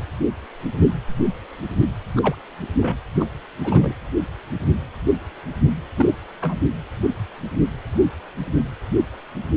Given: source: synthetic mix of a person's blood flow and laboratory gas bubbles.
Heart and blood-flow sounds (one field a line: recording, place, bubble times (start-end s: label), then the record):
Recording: Doppler ultrasound of blood flow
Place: precordium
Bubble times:
2.16-2.35 s: bubbles
2.80-2.97 s: bubbles
3.15-3.27 s: bubbles
3.64-3.95 s: bubbles
5.96-6.15 s: bubbles
6.42-6.58 s: bubbles
From the record:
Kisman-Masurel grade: 221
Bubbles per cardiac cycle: several, 3 to 8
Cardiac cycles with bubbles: 10 to 50%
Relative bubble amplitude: barely perceptible (0.100 to 0.250)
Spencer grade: 2 (many but less than half of the cardiac periods contain bubble signals, singularly or in groups)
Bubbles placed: anywhere in the cardiac cycle